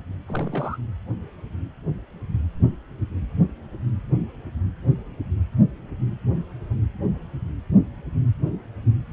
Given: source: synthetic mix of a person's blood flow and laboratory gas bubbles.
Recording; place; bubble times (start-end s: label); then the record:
Doppler ultrasound of blood flow; precordium
0.27-0.77 s: bubbles
From the record:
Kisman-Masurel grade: 211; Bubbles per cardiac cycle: several, 3 to 8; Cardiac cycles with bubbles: 1 to 10%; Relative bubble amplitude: barely perceptible (0.100 to 0.250); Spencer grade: 1 (occasional bubble signal discernible with the cardiac motion signal, with majority of cardiac periods free of bubbles); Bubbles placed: anywhere in the cardiac cycle